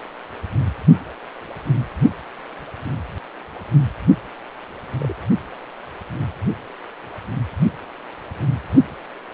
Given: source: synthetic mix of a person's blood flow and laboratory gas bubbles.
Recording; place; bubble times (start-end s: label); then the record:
Doppler ultrasound of blood flow; precordium
5.00-5.13 s: bubbles
From the record:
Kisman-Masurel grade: 111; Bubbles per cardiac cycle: 1 to 2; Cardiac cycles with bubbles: 1 to 10%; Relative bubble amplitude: barely perceptible (0.100 to 0.250); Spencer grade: 1 (occasional bubble signal discernible with the cardiac motion signal, with majority of cardiac periods free of bubbles); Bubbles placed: only in the low amplitude regions of the cardiac cycle